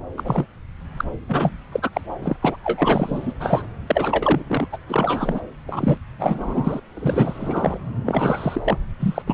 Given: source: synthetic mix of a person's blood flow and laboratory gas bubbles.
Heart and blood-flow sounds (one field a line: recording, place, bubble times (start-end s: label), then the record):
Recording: Doppler ultrasound of blood flow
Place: subclavian vein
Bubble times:
0.17-0.46 s: bubbles
0.97-1.04 s: bubbles
1.28-1.51 s: bubbles
1.72-1.90 s: bubbles
1.93-2.01 s: bubbles
2.22-2.37 s: bubbles
2.41-2.56 s: bubbles
2.64-3.33 s: bubbles
3.40-3.67 s: bubbles
3.87-4.42 s: bubbles
4.48-4.67 s: bubbles
4.72-4.77 s: bubbles
4.88-5.41 s: bubbles
5.67-5.97 s: bubbles
6.19-6.80 s: bubbles
6.95-7.79 s: bubbles
8.05-8.61 s: bubbles
8.64-8.78 s: bubbles
8.99-9.22 s: bubbles
9.27-9.34 s: bubbles
From the record:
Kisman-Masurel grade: 342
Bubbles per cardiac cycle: rolling drumbeat, 9 or more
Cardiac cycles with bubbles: 100%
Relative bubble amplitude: moderate (0.250 to 0.450)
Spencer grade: 3 (all of the cardiac periods contain showers or single bubble signals, but not dominating or overriding the cardiac motion signals)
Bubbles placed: anywhere in the cardiac cycle